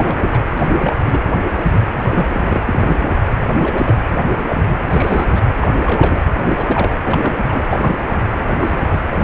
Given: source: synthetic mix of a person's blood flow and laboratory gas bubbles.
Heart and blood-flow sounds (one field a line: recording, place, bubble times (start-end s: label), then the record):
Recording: Doppler ultrasound of blood flow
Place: precordium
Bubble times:
0.00-0.43 s: bubbles
0.57-0.96 s: bubbles
1.05-1.20 s: bubbles
1.52-1.79 s: bubbles
1.93-2.27 s: bubbles
2.33-2.62 s: bubbles
2.65-2.99 s: bubbles
3.42-3.95 s: bubbles
4.14-4.30 s: bubbles
4.49-4.76 s: bubbles
4.86-5.41 s: bubbles
5.60-5.69 s: bubbles
5.84-6.23 s: bubbles
6.36-6.40 s: bubbles
6.46-6.91 s: bubbles
7.02-7.42 s: bubbles
7.44-7.61 s: bubbles
7.69-7.98 s: bubbles
8.07-8.17 s: bubbles
8.60-8.99 s: bubbles
9.11-9.24 s: bubbles
From the record:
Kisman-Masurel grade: 242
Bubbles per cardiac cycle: several, 3 to 8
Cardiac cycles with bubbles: 100%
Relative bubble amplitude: moderate (0.250 to 0.450)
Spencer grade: 3 (all of the cardiac periods contain showers or single bubble signals, but not dominating or overriding the cardiac motion signals)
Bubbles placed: anywhere in the cardiac cycle